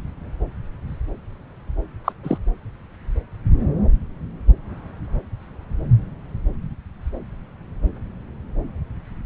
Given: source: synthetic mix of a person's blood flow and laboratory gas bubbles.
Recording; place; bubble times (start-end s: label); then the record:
Doppler ultrasound of blood flow; subclavian vein
2.04-2.12 s: bubbles
2.23-2.38 s: bubbles
From the record:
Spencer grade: 1 (occasional bubble signal discernible with the cardiac motion signal, with majority of cardiac periods free of bubbles); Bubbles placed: anywhere in the cardiac cycle